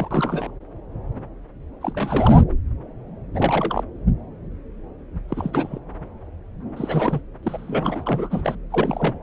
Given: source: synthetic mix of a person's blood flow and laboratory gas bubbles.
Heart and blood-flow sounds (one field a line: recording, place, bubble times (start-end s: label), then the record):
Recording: Doppler ultrasound of blood flow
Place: subclavian vein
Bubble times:
0.00-0.51 s: bubbles
1.81-2.42 s: bubbles
3.33-3.83 s: bubbles
5.29-5.79 s: bubbles
6.76-7.21 s: bubbles
7.42-8.55 s: bubbles
8.70-9.15 s: bubbles
From the record:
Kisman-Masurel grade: 332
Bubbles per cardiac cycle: rolling drumbeat, 9 or more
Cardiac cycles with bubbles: 50 to 99%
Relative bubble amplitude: moderate (0.250 to 0.450)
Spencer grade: 3 (all of the cardiac periods contain showers or single bubble signals, but not dominating or overriding the cardiac motion signals)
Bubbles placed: anywhere in the cardiac cycle